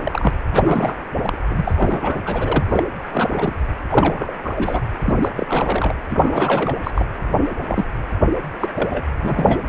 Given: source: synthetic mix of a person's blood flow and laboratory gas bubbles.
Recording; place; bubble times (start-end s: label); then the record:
Doppler ultrasound of blood flow; precordium
0.00-0.34 s: bubbles
0.53-0.95 s: bubbles
1.21-1.38 s: bubbles
1.48-2.21 s: bubbles
2.25-2.64 s: bubbles
2.70-2.83 s: bubbles
3.10-3.56 s: bubbles
3.88-4.33 s: bubbles
4.43-4.82 s: bubbles
4.99-5.31 s: bubbles
5.35-5.95 s: bubbles
6.09-6.75 s: bubbles
6.83-6.91 s: bubbles
6.94-7.07 s: bubbles
7.66-7.84 s: bubbles
8.60-8.68 s: bubbles
8.74-9.06 s: bubbles
9.20-9.62 s: bubbles
From the record:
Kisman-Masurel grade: 342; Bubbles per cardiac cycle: rolling drumbeat, 9 or more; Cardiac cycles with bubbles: 100%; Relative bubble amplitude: moderate (0.250 to 0.450); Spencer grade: 3 (all of the cardiac periods contain showers or single bubble signals, but not dominating or overriding the cardiac motion signals); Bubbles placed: anywhere in the cardiac cycle